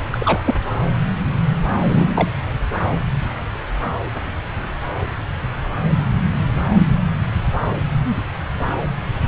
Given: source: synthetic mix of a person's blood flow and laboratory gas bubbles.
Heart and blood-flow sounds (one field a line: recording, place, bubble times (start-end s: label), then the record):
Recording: Doppler ultrasound of blood flow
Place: subclavian vein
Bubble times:
0.11-0.56 s: bubbles
1.89-2.28 s: bubbles
From the record:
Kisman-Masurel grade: 122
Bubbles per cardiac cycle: 1 to 2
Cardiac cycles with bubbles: 10 to 50%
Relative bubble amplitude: moderate (0.250 to 0.450)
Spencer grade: 2 (many but less than half of the cardiac periods contain bubble signals, singularly or in groups)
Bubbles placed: anywhere in the cardiac cycle